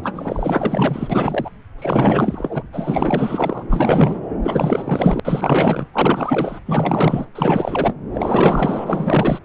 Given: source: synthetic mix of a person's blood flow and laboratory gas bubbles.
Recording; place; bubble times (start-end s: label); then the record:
Doppler ultrasound of blood flow; subclavian vein
0.03-1.50 s: bubbles
1.78-2.63 s: bubbles
2.73-3.67 s: bubbles
3.70-4.21 s: bubbles
4.42-5.20 s: bubbles
5.25-5.86 s: bubbles
5.93-6.59 s: bubbles
6.66-7.25 s: bubbles
7.35-7.94 s: bubbles
8.12-9.39 s: bubbles
From the record:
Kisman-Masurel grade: 444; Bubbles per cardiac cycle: continuous sound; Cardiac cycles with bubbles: 100%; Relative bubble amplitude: maximal (0.775 to 0.999); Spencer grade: 4 (maximum detectable bubble signal sounding continuously throughout systole and diastole of every cardiac period, and overriding the amplitude of the normal cardiac signals); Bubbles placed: anywhere in the cardiac cycle